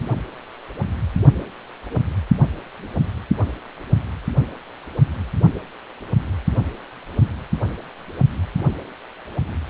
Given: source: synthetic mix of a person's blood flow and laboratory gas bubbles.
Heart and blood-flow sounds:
Doppler ultrasound of blood flow; precordium
no bubbles
From the record:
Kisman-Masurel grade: 000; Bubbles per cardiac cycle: 0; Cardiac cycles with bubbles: 0%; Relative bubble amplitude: no bubbles discernible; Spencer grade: 0 (complete lack of bubble signals)

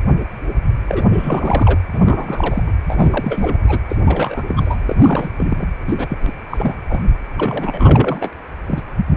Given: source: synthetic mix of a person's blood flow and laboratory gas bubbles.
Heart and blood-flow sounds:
Doppler ultrasound of blood flow; precordium
0.87-1.07 s: bubbles
1.12-1.78 s: bubbles
1.93-2.63 s: bubbles
2.66-2.73 s: bubbles
2.87-3.58 s: bubbles
3.67-3.80 s: bubbles
3.88-3.98 s: bubbles
4.05-4.42 s: bubbles
4.47-5.29 s: bubbles
5.38-5.47 s: bubbles
5.50-5.67 s: bubbles
5.87-6.18 s: bubbles
6.21-6.33 s: bubbles
6.50-6.75 s: bubbles
6.89-7.00 s: bubbles
7.36-8.29 s: bubbles
8.68-8.82 s: bubbles
From the record:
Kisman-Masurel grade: 333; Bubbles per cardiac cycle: rolling drumbeat, 9 or more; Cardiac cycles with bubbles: 50 to 99%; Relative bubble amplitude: loud (0.450 to 0.775); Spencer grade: 3 (all of the cardiac periods contain showers or single bubble signals, but not dominating or overriding the cardiac motion signals); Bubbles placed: anywhere in the cardiac cycle

